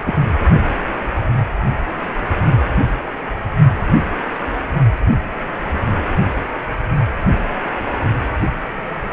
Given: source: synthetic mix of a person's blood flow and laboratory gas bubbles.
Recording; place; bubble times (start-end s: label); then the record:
Doppler ultrasound of blood flow; precordium
0.06-0.14 s: bubbles
From the record:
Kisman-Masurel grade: 112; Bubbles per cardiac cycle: 1 to 2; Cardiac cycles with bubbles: 1 to 10%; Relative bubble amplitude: moderate (0.250 to 0.450); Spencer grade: 1 (occasional bubble signal discernible with the cardiac motion signal, with majority of cardiac periods free of bubbles); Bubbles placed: anywhere in the cardiac cycle